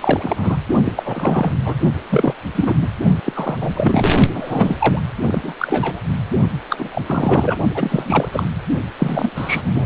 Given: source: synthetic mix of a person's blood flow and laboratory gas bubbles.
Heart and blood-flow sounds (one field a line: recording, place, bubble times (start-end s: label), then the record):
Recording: Doppler ultrasound of blood flow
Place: precordium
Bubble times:
0.00-0.57 s: bubbles
0.84-1.51 s: bubbles
1.64-1.75 s: bubbles
2.09-2.34 s: bubbles
2.55-2.74 s: bubbles
2.81-2.88 s: bubbles
3.25-3.58 s: bubbles
3.60-4.12 s: bubbles
4.33-5.01 s: bubbles
5.26-5.54 s: bubbles
5.59-5.99 s: bubbles
6.69-7.01 s: bubbles
7.06-7.58 s: bubbles
7.74-8.29 s: bubbles
8.32-8.46 s: bubbles
8.99-9.86 s: bubbles
From the record:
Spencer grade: 3 (all of the cardiac periods contain showers or single bubble signals, but not dominating or overriding the cardiac motion signals)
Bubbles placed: only in the low amplitude regions of the cardiac cycle